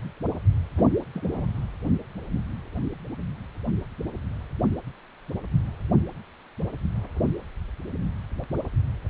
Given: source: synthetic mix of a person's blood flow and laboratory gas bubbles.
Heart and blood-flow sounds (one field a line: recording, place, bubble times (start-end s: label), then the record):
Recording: Doppler ultrasound of blood flow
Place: precordium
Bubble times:
0.77-0.86 s: bubbles
1.14-1.46 s: bubbles
From the record:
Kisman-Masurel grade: 111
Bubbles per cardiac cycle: 1 to 2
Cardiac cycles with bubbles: 1 to 10%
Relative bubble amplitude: barely perceptible (0.100 to 0.250)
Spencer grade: 1 (occasional bubble signal discernible with the cardiac motion signal, with majority of cardiac periods free of bubbles)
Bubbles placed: anywhere in the cardiac cycle